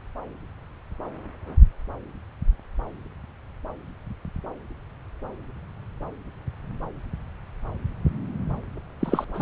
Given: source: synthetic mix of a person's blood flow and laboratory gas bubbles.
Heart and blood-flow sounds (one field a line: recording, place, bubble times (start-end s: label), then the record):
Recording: Doppler ultrasound of blood flow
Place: subclavian vein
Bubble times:
8.99-9.25 s: bubbles
9.34-9.42 s: bubbles
From the record:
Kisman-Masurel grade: 212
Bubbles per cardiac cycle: several, 3 to 8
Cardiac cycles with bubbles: 1 to 10%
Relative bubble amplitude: moderate (0.250 to 0.450)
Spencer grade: 1 (occasional bubble signal discernible with the cardiac motion signal, with majority of cardiac periods free of bubbles)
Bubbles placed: anywhere in the cardiac cycle